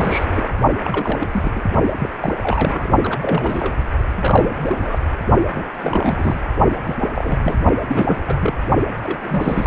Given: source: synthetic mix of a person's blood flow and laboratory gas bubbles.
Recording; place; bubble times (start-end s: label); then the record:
Doppler ultrasound of blood flow; precordium
0.00-0.26 s: bubbles
0.32-0.48 s: bubbles
0.84-1.28 s: bubbles
1.31-1.52 s: bubbles
1.55-1.61 s: bubbles
1.99-2.10 s: bubbles
2.20-2.33 s: bubbles
2.38-2.88 s: bubbles
3.02-3.73 s: bubbles
4.16-4.99 s: bubbles
5.55-5.66 s: bubbles
5.79-6.41 s: bubbles
6.84-6.96 s: bubbles
7.00-7.10 s: bubbles
7.15-7.57 s: bubbles
7.87-8.57 s: bubbles
9.03-9.67 s: bubbles
From the record:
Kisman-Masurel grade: 332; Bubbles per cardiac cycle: rolling drumbeat, 9 or more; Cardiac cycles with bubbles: 50 to 99%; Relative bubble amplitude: moderate (0.250 to 0.450); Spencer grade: 3 (all of the cardiac periods contain showers or single bubble signals, but not dominating or overriding the cardiac motion signals); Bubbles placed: only in the low amplitude regions of the cardiac cycle